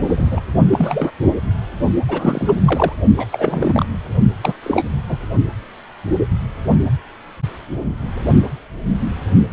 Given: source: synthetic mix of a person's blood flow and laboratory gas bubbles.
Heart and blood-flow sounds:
Doppler ultrasound of blood flow; precordium
0.08-0.41 s: bubbles
0.71-1.11 s: bubbles
2.08-2.52 s: bubbles
2.65-2.92 s: bubbles
3.16-3.26 s: bubbles
3.31-3.85 s: bubbles
4.43-4.54 s: bubbles
4.62-4.85 s: bubbles
5.08-5.18 s: bubbles
From the record:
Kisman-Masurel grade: 223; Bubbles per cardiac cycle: several, 3 to 8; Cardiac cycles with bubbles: 10 to 50%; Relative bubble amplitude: loud (0.450 to 0.775); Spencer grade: 2 (many but less than half of the cardiac periods contain bubble signals, singularly or in groups); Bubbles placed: only in the low amplitude regions of the cardiac cycle

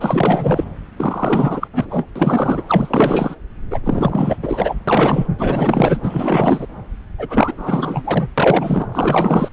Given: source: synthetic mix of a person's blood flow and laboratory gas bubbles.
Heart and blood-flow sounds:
Doppler ultrasound of blood flow; subclavian vein
0.00-0.65 s: bubbles
0.97-1.68 s: bubbles
1.73-2.07 s: bubbles
2.16-2.62 s: bubbles
2.67-3.36 s: bubbles
3.70-3.79 s: bubbles
3.83-4.37 s: bubbles
4.42-4.75 s: bubbles
4.87-5.27 s: bubbles
5.38-6.67 s: bubbles
7.18-8.29 s: bubbles
8.38-8.87 s: bubbles
8.91-9.48 s: bubbles
From the record:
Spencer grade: 4 (maximum detectable bubble signal sounding continuously throughout systole and diastole of every cardiac period, and overriding the amplitude of the normal cardiac signals); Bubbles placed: anywhere in the cardiac cycle

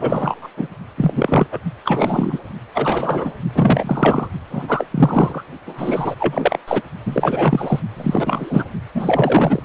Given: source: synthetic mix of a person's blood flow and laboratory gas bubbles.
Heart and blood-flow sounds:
Doppler ultrasound of blood flow; precordium
0.00-0.49 s: bubbles
0.56-0.67 s: bubbles
0.97-1.47 s: bubbles
1.52-1.59 s: bubbles
1.85-2.40 s: bubbles
2.74-3.32 s: bubbles
3.54-4.27 s: bubbles
4.49-4.86 s: bubbles
4.90-5.44 s: bubbles
5.66-6.15 s: bubbles
6.19-6.57 s: bubbles
6.67-6.82 s: bubbles
7.05-7.79 s: bubbles
7.96-8.65 s: bubbles
8.95-9.62 s: bubbles
From the record:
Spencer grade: 3 (all of the cardiac periods contain showers or single bubble signals, but not dominating or overriding the cardiac motion signals); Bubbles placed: only in the low amplitude regions of the cardiac cycle

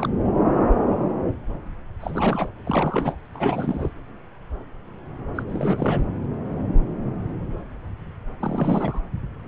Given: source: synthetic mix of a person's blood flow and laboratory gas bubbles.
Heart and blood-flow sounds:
Doppler ultrasound of blood flow; subclavian vein
0.00-0.10 s: bubbles
2.00-2.52 s: bubbles
2.65-3.17 s: bubbles
3.34-3.89 s: bubbles
5.35-5.43 s: bubbles
5.49-6.04 s: bubbles
8.40-9.00 s: bubbles
From the record:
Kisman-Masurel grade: 332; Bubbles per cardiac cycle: rolling drumbeat, 9 or more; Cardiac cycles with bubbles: 50 to 99%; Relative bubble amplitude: moderate (0.250 to 0.450); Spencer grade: 3 (all of the cardiac periods contain showers or single bubble signals, but not dominating or overriding the cardiac motion signals); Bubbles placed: anywhere in the cardiac cycle

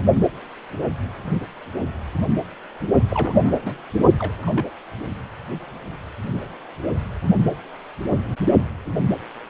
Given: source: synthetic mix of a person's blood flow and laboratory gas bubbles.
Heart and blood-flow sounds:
Doppler ultrasound of blood flow; precordium
3.09-3.81 s: bubbles
4.19-4.34 s: bubbles
4.42-4.52 s: bubbles
4.55-4.70 s: bubbles
From the record:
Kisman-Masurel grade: 221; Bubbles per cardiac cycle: several, 3 to 8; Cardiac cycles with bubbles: 10 to 50%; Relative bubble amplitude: barely perceptible (0.100 to 0.250); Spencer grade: 2 (many but less than half of the cardiac periods contain bubble signals, singularly or in groups); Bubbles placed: only in the low amplitude regions of the cardiac cycle

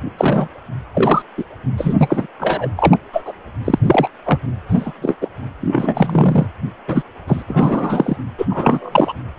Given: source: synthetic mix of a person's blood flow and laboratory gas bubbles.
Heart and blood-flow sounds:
Doppler ultrasound of blood flow; precordium
0.17-0.48 s: bubbles
0.94-1.22 s: bubbles
1.38-1.44 s: bubbles
1.77-1.95 s: bubbles
1.97-2.27 s: bubbles
2.40-2.70 s: bubbles
2.77-2.98 s: bubbles
3.13-3.33 s: bubbles
3.65-3.78 s: bubbles
3.85-4.07 s: bubbles
4.25-4.39 s: bubbles
4.68-4.93 s: bubbles
5.01-5.15 s: bubbles
5.21-5.28 s: bubbles
5.61-6.46 s: bubbles
6.88-7.02 s: bubbles
7.27-7.42 s: bubbles
7.47-8.16 s: bubbles
8.38-8.46 s: bubbles
8.49-9.13 s: bubbles
From the record:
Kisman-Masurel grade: 243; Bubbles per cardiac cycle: several, 3 to 8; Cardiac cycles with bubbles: 100%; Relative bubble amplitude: loud (0.450 to 0.775); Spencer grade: 3 (all of the cardiac periods contain showers or single bubble signals, but not dominating or overriding the cardiac motion signals); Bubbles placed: anywhere in the cardiac cycle

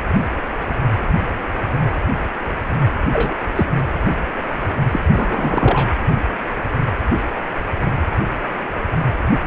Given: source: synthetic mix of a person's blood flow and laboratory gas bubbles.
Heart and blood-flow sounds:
Doppler ultrasound of blood flow; precordium
3.12-3.35 s: bubbles
3.56-3.66 s: bubbles
4.91-4.99 s: bubbles
5.12-5.93 s: bubbles
From the record:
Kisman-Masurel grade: 223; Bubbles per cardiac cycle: several, 3 to 8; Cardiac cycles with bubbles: 10 to 50%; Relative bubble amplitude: loud (0.450 to 0.775); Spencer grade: 2 (many but less than half of the cardiac periods contain bubble signals, singularly or in groups); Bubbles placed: anywhere in the cardiac cycle

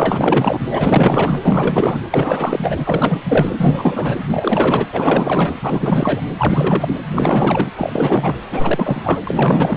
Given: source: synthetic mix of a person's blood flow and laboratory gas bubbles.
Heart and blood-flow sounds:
Doppler ultrasound of blood flow; precordium
0.00-0.60 s: bubbles
0.69-2.00 s: bubbles
2.10-3.52 s: bubbles
3.58-4.16 s: bubbles
4.31-4.87 s: bubbles
4.92-5.54 s: bubbles
5.62-6.21 s: bubbles
6.38-6.95 s: bubbles
7.14-7.71 s: bubbles
7.76-8.35 s: bubbles
8.51-9.19 s: bubbles
9.27-9.77 s: bubbles
From the record:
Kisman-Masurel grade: 444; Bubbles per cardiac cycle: continuous sound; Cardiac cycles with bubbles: 100%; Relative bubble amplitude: maximal (0.775 to 0.999); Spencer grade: 4 (maximum detectable bubble signal sounding continuously throughout systole and diastole of every cardiac period, and overriding the amplitude of the normal cardiac signals); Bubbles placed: anywhere in the cardiac cycle

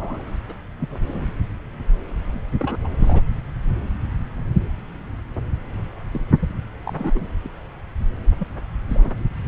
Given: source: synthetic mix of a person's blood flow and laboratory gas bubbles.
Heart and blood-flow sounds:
Doppler ultrasound of blood flow; subclavian vein
0.00-0.22 s: bubbles
0.48-0.53 s: bubbles
0.80-0.88 s: bubbles
0.90-1.25 s: bubbles
2.32-2.40 s: bubbles
2.60-2.77 s: bubbles
2.84-2.88 s: bubbles
2.99-3.23 s: bubbles
6.11-6.21 s: bubbles
6.39-6.50 s: bubbles
6.83-7.26 s: bubbles
7.44-7.49 s: bubbles
8.39-8.46 s: bubbles
8.88-9.11 s: bubbles
From the record:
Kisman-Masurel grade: 221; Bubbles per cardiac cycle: several, 3 to 8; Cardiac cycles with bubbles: 10 to 50%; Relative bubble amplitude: barely perceptible (0.100 to 0.250); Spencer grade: 2 (many but less than half of the cardiac periods contain bubble signals, singularly or in groups); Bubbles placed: anywhere in the cardiac cycle

